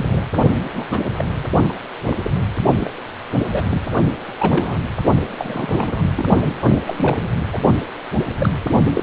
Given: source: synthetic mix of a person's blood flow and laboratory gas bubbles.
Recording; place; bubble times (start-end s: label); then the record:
Doppler ultrasound of blood flow; precordium
0.00-0.08 s: bubbles
0.11-0.24 s: bubbles
0.75-0.85 s: bubbles
0.92-1.05 s: bubbles
1.18-1.25 s: bubbles
1.69-1.76 s: bubbles
2.05-2.17 s: bubbles
2.24-2.30 s: bubbles
2.79-2.93 s: bubbles
3.51-3.64 s: bubbles
3.71-3.81 s: bubbles
4.38-4.80 s: bubbles
5.38-6.03 s: bubbles
6.15-6.25 s: bubbles
6.87-7.28 s: bubbles
7.52-7.58 s: bubbles
7.80-7.84 s: bubbles
8.38-8.49 s: bubbles
8.95-9.03 s: bubbles
From the record:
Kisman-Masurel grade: 232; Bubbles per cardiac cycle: several, 3 to 8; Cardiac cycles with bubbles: 50 to 99%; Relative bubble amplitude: moderate (0.250 to 0.450); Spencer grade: 3 (all of the cardiac periods contain showers or single bubble signals, but not dominating or overriding the cardiac motion signals); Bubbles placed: only in the low amplitude regions of the cardiac cycle